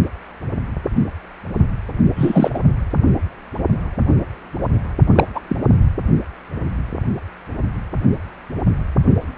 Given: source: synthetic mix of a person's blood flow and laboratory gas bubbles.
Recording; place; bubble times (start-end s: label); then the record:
Doppler ultrasound of blood flow; precordium
2.16-2.51 s: bubbles
2.54-2.60 s: bubbles
5.15-5.25 s: bubbles
5.34-5.40 s: bubbles
5.49-5.56 s: bubbles
From the record:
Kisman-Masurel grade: 223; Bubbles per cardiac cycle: several, 3 to 8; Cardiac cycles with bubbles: 10 to 50%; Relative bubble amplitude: loud (0.450 to 0.775); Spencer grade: 2 (many but less than half of the cardiac periods contain bubble signals, singularly or in groups); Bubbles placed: only in the low amplitude regions of the cardiac cycle